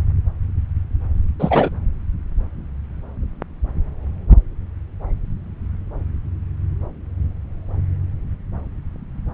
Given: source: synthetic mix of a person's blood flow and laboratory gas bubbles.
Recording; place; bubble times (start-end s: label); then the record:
Doppler ultrasound of blood flow; subclavian vein
1.39-1.70 s: bubbles
From the record:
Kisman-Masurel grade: 213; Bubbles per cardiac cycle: several, 3 to 8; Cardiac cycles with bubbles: 1 to 10%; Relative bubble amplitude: loud (0.450 to 0.775); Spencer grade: 1 (occasional bubble signal discernible with the cardiac motion signal, with majority of cardiac periods free of bubbles); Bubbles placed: anywhere in the cardiac cycle